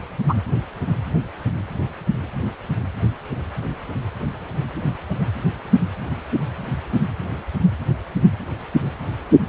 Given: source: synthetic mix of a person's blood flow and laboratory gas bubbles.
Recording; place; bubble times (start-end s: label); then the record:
Doppler ultrasound of blood flow; precordium
0.29-0.34 s: bubbles
From the record:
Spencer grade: 1 (occasional bubble signal discernible with the cardiac motion signal, with majority of cardiac periods free of bubbles); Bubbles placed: anywhere in the cardiac cycle